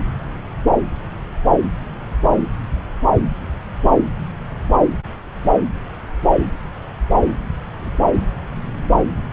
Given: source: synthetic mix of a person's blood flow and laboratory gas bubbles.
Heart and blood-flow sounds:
Doppler ultrasound of blood flow; subclavian vein
no bubbles
From the record:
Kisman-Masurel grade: 000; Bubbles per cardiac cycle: 0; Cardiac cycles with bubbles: 0%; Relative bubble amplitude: no bubbles discernible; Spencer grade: 0 (complete lack of bubble signals)

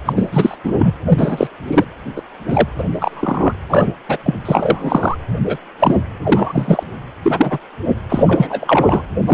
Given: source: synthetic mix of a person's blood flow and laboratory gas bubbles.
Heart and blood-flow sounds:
Doppler ultrasound of blood flow; precordium
0.05-0.13 s: bubbles
0.16-0.55 s: bubbles
0.64-0.92 s: bubbles
1.08-1.47 s: bubbles
1.67-1.84 s: bubbles
2.16-2.21 s: bubbles
2.48-2.67 s: bubbles
2.78-2.84 s: bubbles
2.92-3.53 s: bubbles
3.70-3.92 s: bubbles
4.08-4.17 s: bubbles
4.24-4.39 s: bubbles
4.45-5.16 s: bubbles
5.45-5.58 s: bubbles
5.79-5.96 s: bubbles
6.24-6.83 s: bubbles
7.23-7.58 s: bubbles
8.09-9.02 s: bubbles
9.27-9.34 s: bubbles
From the record:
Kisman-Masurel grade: 243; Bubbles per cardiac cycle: several, 3 to 8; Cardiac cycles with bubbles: 100%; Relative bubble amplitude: loud (0.450 to 0.775); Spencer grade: 3 (all of the cardiac periods contain showers or single bubble signals, but not dominating or overriding the cardiac motion signals); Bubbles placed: anywhere in the cardiac cycle

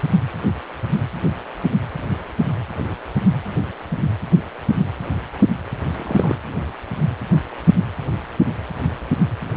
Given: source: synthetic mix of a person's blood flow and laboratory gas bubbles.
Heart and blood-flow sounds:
Doppler ultrasound of blood flow; precordium
5.96-6.35 s: bubbles
From the record:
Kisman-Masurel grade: 112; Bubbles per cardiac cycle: 1 to 2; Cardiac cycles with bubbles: 1 to 10%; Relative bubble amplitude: moderate (0.250 to 0.450); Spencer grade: 1 (occasional bubble signal discernible with the cardiac motion signal, with majority of cardiac periods free of bubbles); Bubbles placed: anywhere in the cardiac cycle

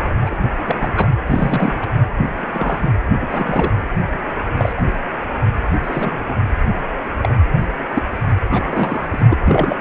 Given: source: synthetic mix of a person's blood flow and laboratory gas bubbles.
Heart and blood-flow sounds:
Doppler ultrasound of blood flow; precordium
0.00-0.10 s: bubbles
0.26-0.35 s: bubbles
0.65-0.91 s: bubbles
0.96-1.08 s: bubbles
1.26-1.88 s: bubbles
2.41-2.91 s: bubbles
3.21-3.73 s: bubbles
4.55-4.73 s: bubbles
4.76-4.82 s: bubbles
4.86-4.93 s: bubbles
5.82-6.38 s: bubbles
7.22-7.34 s: bubbles
7.94-8.03 s: bubbles
8.51-9.06 s: bubbles
9.11-9.39 s: bubbles
9.44-9.76 s: bubbles
From the record:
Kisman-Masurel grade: 242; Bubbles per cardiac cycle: several, 3 to 8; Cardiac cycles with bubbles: 100%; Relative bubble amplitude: moderate (0.250 to 0.450); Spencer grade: 3 (all of the cardiac periods contain showers or single bubble signals, but not dominating or overriding the cardiac motion signals); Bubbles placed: anywhere in the cardiac cycle

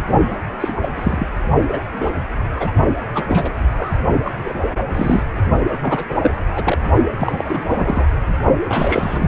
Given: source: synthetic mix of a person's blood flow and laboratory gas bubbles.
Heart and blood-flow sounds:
Doppler ultrasound of blood flow; precordium
0.28-0.36 s: bubbles
0.60-0.72 s: bubbles
0.81-0.89 s: bubbles
0.95-1.27 s: bubbles
1.69-1.80 s: bubbles
1.93-2.11 s: bubbles
2.56-2.72 s: bubbles
3.14-3.25 s: bubbles
3.28-3.50 s: bubbles
3.77-3.92 s: bubbles
4.24-4.30 s: bubbles
4.44-4.59 s: bubbles
4.93-5.23 s: bubbles
5.81-6.06 s: bubbles
6.08-6.32 s: bubbles
6.55-6.78 s: bubbles
7.18-7.62 s: bubbles
7.67-8.06 s: bubbles
8.69-9.28 s: bubbles
From the record:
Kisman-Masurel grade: 242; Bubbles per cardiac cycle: several, 3 to 8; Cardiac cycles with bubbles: 100%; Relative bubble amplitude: moderate (0.250 to 0.450); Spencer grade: 3 (all of the cardiac periods contain showers or single bubble signals, but not dominating or overriding the cardiac motion signals); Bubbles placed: only in the low amplitude regions of the cardiac cycle

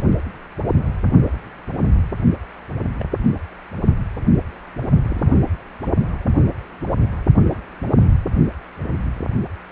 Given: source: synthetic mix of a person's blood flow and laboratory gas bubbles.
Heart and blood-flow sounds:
Doppler ultrasound of blood flow; precordium
2.99-3.04 s: bubbles
5.03-5.38 s: bubbles
7.49-7.55 s: bubbles
8.01-8.10 s: bubbles
From the record:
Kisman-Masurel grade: 121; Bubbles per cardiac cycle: 1 to 2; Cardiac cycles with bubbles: 10 to 50%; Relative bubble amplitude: barely perceptible (0.100 to 0.250); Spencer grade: 2 (many but less than half of the cardiac periods contain bubble signals, singularly or in groups); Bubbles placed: only in the low amplitude regions of the cardiac cycle

